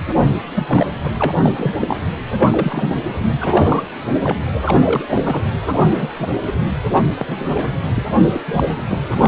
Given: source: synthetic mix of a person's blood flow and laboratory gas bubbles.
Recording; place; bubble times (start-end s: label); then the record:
Doppler ultrasound of blood flow; precordium
0.55-0.92 s: bubbles
1.04-1.11 s: bubbles
1.17-1.35 s: bubbles
1.42-1.75 s: bubbles
1.80-2.15 s: bubbles
2.40-3.20 s: bubbles
3.40-3.84 s: bubbles
4.23-4.37 s: bubbles
4.64-4.77 s: bubbles
4.83-5.05 s: bubbles
5.08-5.48 s: bubbles
5.72-5.79 s: bubbles
5.82-6.33 s: bubbles
6.46-6.52 s: bubbles
6.92-7.04 s: bubbles
7.17-7.47 s: bubbles
7.50-7.69 s: bubbles
7.94-8.04 s: bubbles
8.32-8.42 s: bubbles
8.48-8.83 s: bubbles
8.88-8.99 s: bubbles
9.17-9.28 s: bubbles
From the record:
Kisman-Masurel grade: 242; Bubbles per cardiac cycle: several, 3 to 8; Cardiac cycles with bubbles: 100%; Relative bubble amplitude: moderate (0.250 to 0.450); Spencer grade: 3 (all of the cardiac periods contain showers or single bubble signals, but not dominating or overriding the cardiac motion signals); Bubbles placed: anywhere in the cardiac cycle